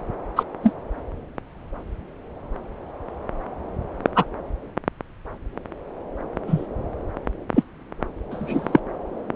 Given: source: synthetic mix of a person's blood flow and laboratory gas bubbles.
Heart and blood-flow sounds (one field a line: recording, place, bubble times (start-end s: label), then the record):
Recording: Doppler ultrasound of blood flow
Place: subclavian vein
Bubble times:
0.36-0.43 s: bubbles
0.62-0.74 s: bubbles
4.16-4.25 s: bubbles
6.48-6.67 s: bubbles
7.55-7.64 s: bubbles
8.31-8.79 s: bubbles
From the record:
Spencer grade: 2 (many but less than half of the cardiac periods contain bubble signals, singularly or in groups)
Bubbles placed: anywhere in the cardiac cycle